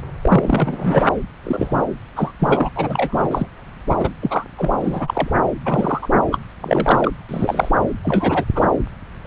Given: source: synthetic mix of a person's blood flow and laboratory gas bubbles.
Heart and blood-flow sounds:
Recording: Doppler ultrasound of blood flow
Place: subclavian vein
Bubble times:
0.22-1.03 s: bubbles
1.43-1.84 s: bubbles
2.16-2.32 s: bubbles
2.39-2.69 s: bubbles
2.75-3.48 s: bubbles
3.90-3.95 s: bubbles
3.98-4.09 s: bubbles
4.22-4.45 s: bubbles
4.58-4.71 s: bubbles
4.81-5.30 s: bubbles
5.65-6.07 s: bubbles
6.32-6.39 s: bubbles
6.61-7.12 s: bubbles
7.29-7.69 s: bubbles
8.03-8.45 s: bubbles
8.54-8.66 s: bubbles
9.25-9.27 s: bubbles
From the record:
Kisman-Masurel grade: 243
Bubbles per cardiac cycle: several, 3 to 8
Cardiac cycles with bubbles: 100%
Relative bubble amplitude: loud (0.450 to 0.775)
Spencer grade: 3 (all of the cardiac periods contain showers or single bubble signals, but not dominating or overriding the cardiac motion signals)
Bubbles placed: anywhere in the cardiac cycle

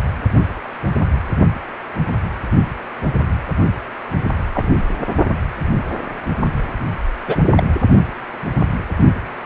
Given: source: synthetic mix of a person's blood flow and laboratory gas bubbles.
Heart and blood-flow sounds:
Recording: Doppler ultrasound of blood flow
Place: precordium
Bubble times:
4.54-4.77 s: bubbles
7.27-7.37 s: bubbles
7.56-7.63 s: bubbles
From the record:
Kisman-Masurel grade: 123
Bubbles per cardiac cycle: 1 to 2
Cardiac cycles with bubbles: 10 to 50%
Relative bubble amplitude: loud (0.450 to 0.775)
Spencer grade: 2 (many but less than half of the cardiac periods contain bubble signals, singularly or in groups)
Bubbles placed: only in the low amplitude regions of the cardiac cycle

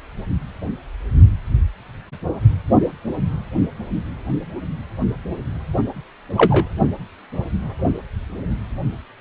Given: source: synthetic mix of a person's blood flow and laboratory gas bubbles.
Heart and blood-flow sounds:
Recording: Doppler ultrasound of blood flow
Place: precordium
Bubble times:
6.38-6.66 s: bubbles
From the record:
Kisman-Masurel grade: 123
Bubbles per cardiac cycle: 1 to 2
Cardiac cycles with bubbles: 10 to 50%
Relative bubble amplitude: loud (0.450 to 0.775)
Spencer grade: 2 (many but less than half of the cardiac periods contain bubble signals, singularly or in groups)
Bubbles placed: only in the low amplitude regions of the cardiac cycle

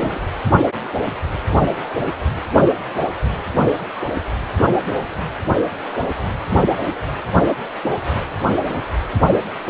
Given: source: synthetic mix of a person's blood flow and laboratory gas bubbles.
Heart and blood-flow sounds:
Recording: Doppler ultrasound of blood flow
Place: precordium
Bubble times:
0.00-0.20 s: bubbles
From the record:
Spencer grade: 1 (occasional bubble signal discernible with the cardiac motion signal, with majority of cardiac periods free of bubbles)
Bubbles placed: anywhere in the cardiac cycle

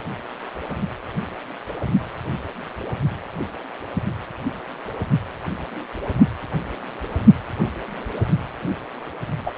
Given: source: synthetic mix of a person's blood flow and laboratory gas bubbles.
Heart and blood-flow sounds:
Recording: Doppler ultrasound of blood flow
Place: precordium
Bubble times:
9.46-9.51 s: bubbles
From the record:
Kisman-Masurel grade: 113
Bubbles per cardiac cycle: 1 to 2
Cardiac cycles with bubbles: 1 to 10%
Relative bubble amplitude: loud (0.450 to 0.775)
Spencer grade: 1 (occasional bubble signal discernible with the cardiac motion signal, with majority of cardiac periods free of bubbles)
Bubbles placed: only in the low amplitude regions of the cardiac cycle

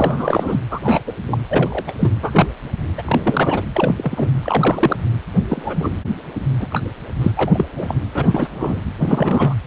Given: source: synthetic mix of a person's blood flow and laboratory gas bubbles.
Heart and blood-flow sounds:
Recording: Doppler ultrasound of blood flow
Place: precordium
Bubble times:
0.00-0.60 s: bubbles
0.70-0.80 s: bubbles
0.83-1.00 s: bubbles
1.06-1.12 s: bubbles
1.25-1.43 s: bubbles
1.49-1.84 s: bubbles
1.88-1.91 s: bubbles
1.99-2.10 s: bubbles
2.22-2.48 s: bubbles
2.98-3.64 s: bubbles
3.74-4.29 s: bubbles
4.43-4.96 s: bubbles
5.50-5.90 s: bubbles
6.58-6.67 s: bubbles
6.71-6.80 s: bubbles
7.21-7.32 s: bubbles
7.35-7.65 s: bubbles
7.75-7.94 s: bubbles
8.14-8.48 s: bubbles
8.54-8.82 s: bubbles
8.99-9.54 s: bubbles
From the record:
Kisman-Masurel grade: 243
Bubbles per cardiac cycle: several, 3 to 8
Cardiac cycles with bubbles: 100%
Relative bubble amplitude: loud (0.450 to 0.775)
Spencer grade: 3 (all of the cardiac periods contain showers or single bubble signals, but not dominating or overriding the cardiac motion signals)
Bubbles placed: anywhere in the cardiac cycle

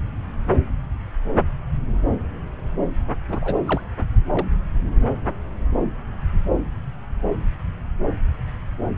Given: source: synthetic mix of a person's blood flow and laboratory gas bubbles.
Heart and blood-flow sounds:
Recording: Doppler ultrasound of blood flow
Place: subclavian vein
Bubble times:
3.29-3.58 s: bubbles
3.67-3.82 s: bubbles
4.33-4.46 s: bubbles
From the record:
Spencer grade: 1 (occasional bubble signal discernible with the cardiac motion signal, with majority of cardiac periods free of bubbles)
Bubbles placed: anywhere in the cardiac cycle

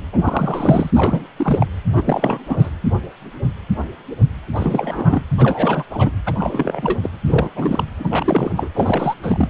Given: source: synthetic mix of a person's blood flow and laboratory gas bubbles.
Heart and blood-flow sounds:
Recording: Doppler ultrasound of blood flow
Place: precordium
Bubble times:
0.12-0.91 s: bubbles
0.95-1.23 s: bubbles
1.36-1.66 s: bubbles
1.95-2.70 s: bubbles
4.54-5.22 s: bubbles
5.38-5.84 s: bubbles
5.91-6.11 s: bubbles
6.26-6.99 s: bubbles
7.03-7.09 s: bubbles
7.26-7.50 s: bubbles
7.55-7.85 s: bubbles
7.98-8.70 s: bubbles
8.74-9.14 s: bubbles
9.23-9.49 s: bubbles
From the record:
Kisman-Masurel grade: 332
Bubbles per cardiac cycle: rolling drumbeat, 9 or more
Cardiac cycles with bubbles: 50 to 99%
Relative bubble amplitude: moderate (0.250 to 0.450)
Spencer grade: 3 (all of the cardiac periods contain showers or single bubble signals, but not dominating or overriding the cardiac motion signals)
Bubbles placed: anywhere in the cardiac cycle

